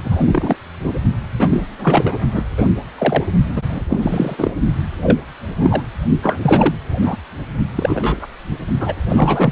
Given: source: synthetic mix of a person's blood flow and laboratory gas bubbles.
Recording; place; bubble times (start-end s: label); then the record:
Doppler ultrasound of blood flow; precordium
0.04-0.56 s: bubbles
0.82-0.94 s: bubbles
1.39-1.67 s: bubbles
1.78-2.17 s: bubbles
2.33-2.44 s: bubbles
2.57-2.69 s: bubbles
2.98-3.23 s: bubbles
3.56-3.62 s: bubbles
3.69-3.84 s: bubbles
3.89-4.51 s: bubbles
5.03-5.19 s: bubbles
5.60-5.83 s: bubbles
6.22-6.38 s: bubbles
6.42-6.75 s: bubbles
7.02-7.17 s: bubbles
7.75-8.27 s: bubbles
8.79-8.94 s: bubbles
9.09-9.52 s: bubbles
From the record:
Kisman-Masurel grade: 243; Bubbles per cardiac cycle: several, 3 to 8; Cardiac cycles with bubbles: 100%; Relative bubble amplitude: loud (0.450 to 0.775); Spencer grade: 3 (all of the cardiac periods contain showers or single bubble signals, but not dominating or overriding the cardiac motion signals); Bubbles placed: only in the low amplitude regions of the cardiac cycle